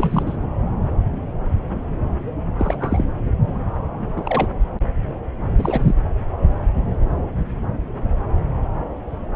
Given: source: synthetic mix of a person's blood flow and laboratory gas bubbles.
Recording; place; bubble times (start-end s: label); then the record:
Doppler ultrasound of blood flow; subclavian vein
0.00-0.23 s: bubbles
0.26-0.38 s: bubbles
2.58-3.04 s: bubbles
4.16-4.47 s: bubbles
5.58-5.93 s: bubbles
From the record:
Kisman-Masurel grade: 222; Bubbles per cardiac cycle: several, 3 to 8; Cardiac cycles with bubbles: 10 to 50%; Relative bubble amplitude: moderate (0.250 to 0.450); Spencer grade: 2 (many but less than half of the cardiac periods contain bubble signals, singularly or in groups); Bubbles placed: anywhere in the cardiac cycle